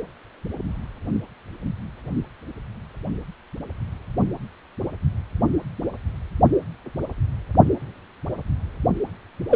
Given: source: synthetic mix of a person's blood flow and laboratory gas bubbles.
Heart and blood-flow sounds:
Doppler ultrasound of blood flow; precordium
9.49-9.56 s: bubbles
From the record:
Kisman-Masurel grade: 113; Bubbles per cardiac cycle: 1 to 2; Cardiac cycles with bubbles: 1 to 10%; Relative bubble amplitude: loud (0.450 to 0.775); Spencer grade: 1 (occasional bubble signal discernible with the cardiac motion signal, with majority of cardiac periods free of bubbles); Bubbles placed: only in the low amplitude regions of the cardiac cycle

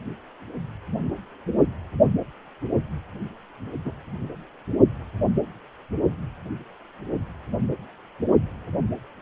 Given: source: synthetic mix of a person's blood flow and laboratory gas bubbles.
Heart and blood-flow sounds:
Doppler ultrasound of blood flow; precordium
3.84-3.92 s: bubbles
From the record:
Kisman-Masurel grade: 122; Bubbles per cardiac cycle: 1 to 2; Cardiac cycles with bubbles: 10 to 50%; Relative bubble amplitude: moderate (0.250 to 0.450); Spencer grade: 2 (many but less than half of the cardiac periods contain bubble signals, singularly or in groups); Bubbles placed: only in the low amplitude regions of the cardiac cycle

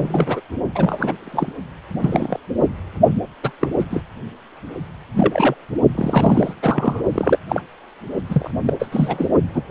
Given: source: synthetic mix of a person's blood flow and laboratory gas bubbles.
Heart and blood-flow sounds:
Doppler ultrasound of blood flow; precordium
0.00-0.41 s: bubbles
0.75-1.14 s: bubbles
1.20-1.61 s: bubbles
2.01-2.40 s: bubbles
3.43-3.50 s: bubbles
3.59-3.67 s: bubbles
3.79-3.84 s: bubbles
3.90-4.01 s: bubbles
5.14-5.54 s: bubbles
5.95-6.54 s: bubbles
6.62-7.01 s: bubbles
7.13-7.38 s: bubbles
7.49-7.62 s: bubbles
8.30-8.51 s: bubbles
8.65-8.74 s: bubbles
8.79-8.87 s: bubbles
8.92-9.28 s: bubbles
9.53-9.62 s: bubbles
From the record:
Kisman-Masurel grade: 242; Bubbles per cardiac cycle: several, 3 to 8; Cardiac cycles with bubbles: 100%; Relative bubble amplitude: moderate (0.250 to 0.450); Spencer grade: 3 (all of the cardiac periods contain showers or single bubble signals, but not dominating or overriding the cardiac motion signals); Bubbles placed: only in the low amplitude regions of the cardiac cycle

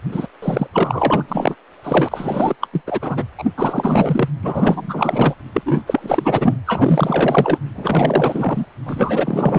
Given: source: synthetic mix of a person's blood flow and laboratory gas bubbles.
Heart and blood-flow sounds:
Doppler ultrasound of blood flow; precordium
0.11-0.27 s: bubbles
0.42-0.67 s: bubbles
0.73-1.55 s: bubbles
1.84-2.55 s: bubbles
2.60-2.67 s: bubbles
2.72-2.81 s: bubbles
2.86-3.26 s: bubbles
3.38-3.44 s: bubbles
3.57-4.29 s: bubbles
4.42-5.34 s: bubbles
5.54-5.62 s: bubbles
5.66-5.81 s: bubbles
5.87-6.58 s: bubbles
6.66-7.58 s: bubbles
7.75-8.66 s: bubbles
8.86-9.59 s: bubbles
From the record:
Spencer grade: 4 (maximum detectable bubble signal sounding continuously throughout systole and diastole of every cardiac period, and overriding the amplitude of the normal cardiac signals); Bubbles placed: anywhere in the cardiac cycle

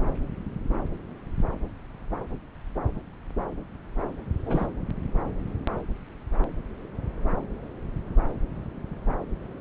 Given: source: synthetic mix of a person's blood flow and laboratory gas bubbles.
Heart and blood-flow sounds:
Doppler ultrasound of blood flow; subclavian vein
4.45-4.66 s: bubbles
From the record:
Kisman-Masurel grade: 111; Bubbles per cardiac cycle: 1 to 2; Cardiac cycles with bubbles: 1 to 10%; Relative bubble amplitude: barely perceptible (0.100 to 0.250); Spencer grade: 1 (occasional bubble signal discernible with the cardiac motion signal, with majority of cardiac periods free of bubbles); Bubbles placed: anywhere in the cardiac cycle

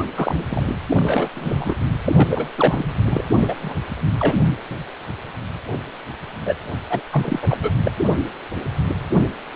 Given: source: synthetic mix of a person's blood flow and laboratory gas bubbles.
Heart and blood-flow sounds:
Doppler ultrasound of blood flow; precordium
0.00-0.05 s: bubbles
0.16-0.44 s: bubbles
0.50-0.75 s: bubbles
0.89-1.29 s: bubbles
1.36-1.76 s: bubbles
2.05-2.48 s: bubbles
2.56-2.84 s: bubbles
3.09-3.23 s: bubbles
3.42-3.56 s: bubbles
3.61-3.75 s: bubbles
4.19-4.35 s: bubbles
6.46-6.54 s: bubbles
6.90-7.01 s: bubbles
7.12-7.40 s: bubbles
7.42-7.58 s: bubbles
7.61-7.71 s: bubbles
7.83-7.92 s: bubbles
From the record:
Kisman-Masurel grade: 332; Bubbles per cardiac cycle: rolling drumbeat, 9 or more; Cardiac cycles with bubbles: 50 to 99%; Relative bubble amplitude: moderate (0.250 to 0.450); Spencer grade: 3 (all of the cardiac periods contain showers or single bubble signals, but not dominating or overriding the cardiac motion signals); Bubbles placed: anywhere in the cardiac cycle

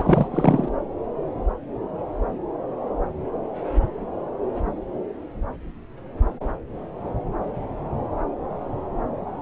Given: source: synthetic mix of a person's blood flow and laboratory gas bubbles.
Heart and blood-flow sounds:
Doppler ultrasound of blood flow; subclavian vein
0.00-0.27 s: bubbles
0.31-0.69 s: bubbles
From the record:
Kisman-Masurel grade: 213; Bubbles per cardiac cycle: several, 3 to 8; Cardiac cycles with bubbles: 1 to 10%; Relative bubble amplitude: loud (0.450 to 0.775); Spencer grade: 1 (occasional bubble signal discernible with the cardiac motion signal, with majority of cardiac periods free of bubbles); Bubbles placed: anywhere in the cardiac cycle

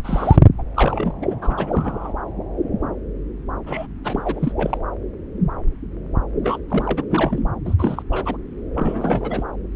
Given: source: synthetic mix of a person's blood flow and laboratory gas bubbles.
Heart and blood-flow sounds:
Doppler ultrasound of blood flow; subclavian vein
0.00-0.37 s: bubbles
0.58-0.62 s: bubbles
0.74-1.15 s: bubbles
1.22-1.35 s: bubbles
1.41-2.13 s: bubbles
3.66-3.86 s: bubbles
4.04-4.52 s: bubbles
4.57-4.78 s: bubbles
6.44-6.58 s: bubbles
6.68-7.03 s: bubbles
7.10-7.41 s: bubbles
7.65-7.75 s: bubbles
7.79-8.03 s: bubbles
8.10-8.37 s: bubbles
8.74-9.43 s: bubbles
From the record:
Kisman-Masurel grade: 332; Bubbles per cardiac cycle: rolling drumbeat, 9 or more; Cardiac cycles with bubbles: 50 to 99%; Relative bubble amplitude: moderate (0.250 to 0.450); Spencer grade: 3 (all of the cardiac periods contain showers or single bubble signals, but not dominating or overriding the cardiac motion signals); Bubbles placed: anywhere in the cardiac cycle

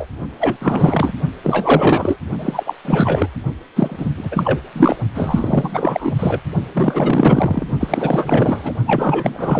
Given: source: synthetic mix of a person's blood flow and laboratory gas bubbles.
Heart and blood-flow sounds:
Doppler ultrasound of blood flow; precordium
0.00-0.05 s: bubbles
0.39-0.57 s: bubbles
0.60-1.14 s: bubbles
1.43-2.18 s: bubbles
2.39-2.73 s: bubbles
2.84-3.28 s: bubbles
3.75-4.06 s: bubbles
4.17-4.29 s: bubbles
4.31-4.60 s: bubbles
4.73-4.96 s: bubbles
5.14-6.41 s: bubbles
6.74-7.66 s: bubbles
7.79-8.73 s: bubbles
8.86-9.60 s: bubbles
From the record:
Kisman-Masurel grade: 444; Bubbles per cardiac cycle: continuous sound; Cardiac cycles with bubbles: 100%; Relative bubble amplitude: maximal (0.775 to 0.999); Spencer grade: 4 (maximum detectable bubble signal sounding continuously throughout systole and diastole of every cardiac period, and overriding the amplitude of the normal cardiac signals); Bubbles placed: only in the low amplitude regions of the cardiac cycle

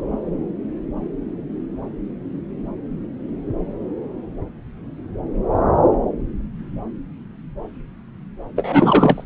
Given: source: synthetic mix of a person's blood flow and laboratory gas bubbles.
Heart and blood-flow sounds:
Doppler ultrasound of blood flow; subclavian vein
8.56-9.25 s: bubbles
From the record:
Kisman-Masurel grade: 213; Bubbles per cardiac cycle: several, 3 to 8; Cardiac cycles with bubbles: 1 to 10%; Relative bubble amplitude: loud (0.450 to 0.775); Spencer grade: 1 (occasional bubble signal discernible with the cardiac motion signal, with majority of cardiac periods free of bubbles); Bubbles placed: anywhere in the cardiac cycle

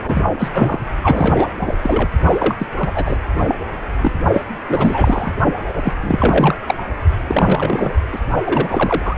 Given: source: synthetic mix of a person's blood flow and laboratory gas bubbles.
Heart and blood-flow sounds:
Doppler ultrasound of blood flow; precordium
0.05-0.23 s: bubbles
0.39-0.49 s: bubbles
0.54-0.79 s: bubbles
1.03-1.48 s: bubbles
1.59-1.74 s: bubbles
1.82-2.09 s: bubbles
2.25-2.56 s: bubbles
2.58-2.67 s: bubbles
2.78-2.92 s: bubbles
2.94-3.18 s: bubbles
3.48-3.55 s: bubbles
4.01-4.12 s: bubbles
4.33-4.42 s: bubbles
4.68-5.33 s: bubbles
5.75-5.92 s: bubbles
6.02-6.55 s: bubbles
6.67-6.75 s: bubbles
7.27-7.95 s: bubbles
8.12-8.21 s: bubbles
8.45-9.16 s: bubbles
From the record:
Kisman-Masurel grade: 343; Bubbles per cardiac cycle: rolling drumbeat, 9 or more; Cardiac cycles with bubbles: 100%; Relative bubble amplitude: loud (0.450 to 0.775); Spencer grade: 3 (all of the cardiac periods contain showers or single bubble signals, but not dominating or overriding the cardiac motion signals); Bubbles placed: only in the low amplitude regions of the cardiac cycle

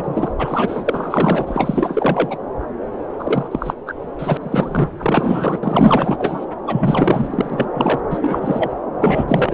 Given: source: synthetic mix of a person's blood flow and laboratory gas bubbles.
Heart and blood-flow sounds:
Doppler ultrasound of blood flow; subclavian vein
0.00-0.33 s: bubbles
0.38-2.38 s: bubbles
3.19-3.48 s: bubbles
3.51-3.74 s: bubbles
3.87-3.95 s: bubbles
4.19-4.37 s: bubbles
4.41-4.89 s: bubbles
4.99-5.58 s: bubbles
5.63-6.46 s: bubbles
6.67-7.66 s: bubbles
7.74-8.00 s: bubbles
8.10-8.71 s: bubbles
9.00-9.53 s: bubbles
From the record:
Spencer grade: 4 (maximum detectable bubble signal sounding continuously throughout systole and diastole of every cardiac period, and overriding the amplitude of the normal cardiac signals); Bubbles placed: anywhere in the cardiac cycle

